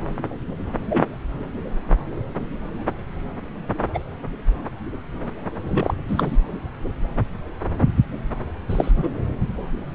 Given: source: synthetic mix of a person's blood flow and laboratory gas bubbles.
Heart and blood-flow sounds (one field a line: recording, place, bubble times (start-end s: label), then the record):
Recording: Doppler ultrasound of blood flow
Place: subclavian vein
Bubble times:
0.89-1.05 s: bubbles
3.94-3.99 s: bubbles
5.68-5.94 s: bubbles
6.08-6.36 s: bubbles
8.69-8.92 s: bubbles
8.96-9.08 s: bubbles
From the record:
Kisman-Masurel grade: 122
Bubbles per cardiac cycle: 1 to 2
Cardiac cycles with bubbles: 10 to 50%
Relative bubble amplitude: moderate (0.250 to 0.450)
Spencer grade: 2 (many but less than half of the cardiac periods contain bubble signals, singularly or in groups)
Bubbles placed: anywhere in the cardiac cycle